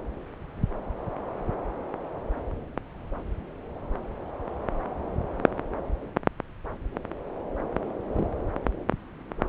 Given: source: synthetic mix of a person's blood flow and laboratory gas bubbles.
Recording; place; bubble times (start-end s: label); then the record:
Doppler ultrasound of blood flow; subclavian vein
8.12-8.27 s: bubbles
From the record:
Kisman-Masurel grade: 121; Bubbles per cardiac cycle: 1 to 2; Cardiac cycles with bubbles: 10 to 50%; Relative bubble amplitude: barely perceptible (0.100 to 0.250); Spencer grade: 2 (many but less than half of the cardiac periods contain bubble signals, singularly or in groups); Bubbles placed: anywhere in the cardiac cycle